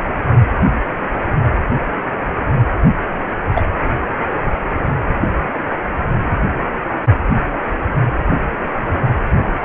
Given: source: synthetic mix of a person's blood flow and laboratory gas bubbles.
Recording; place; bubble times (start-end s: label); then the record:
Doppler ultrasound of blood flow; precordium
3.54-3.65 s: bubbles
From the record:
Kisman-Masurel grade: 113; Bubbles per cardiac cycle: 1 to 2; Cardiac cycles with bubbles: 1 to 10%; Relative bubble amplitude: loud (0.450 to 0.775); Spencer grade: 1 (occasional bubble signal discernible with the cardiac motion signal, with majority of cardiac periods free of bubbles); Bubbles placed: anywhere in the cardiac cycle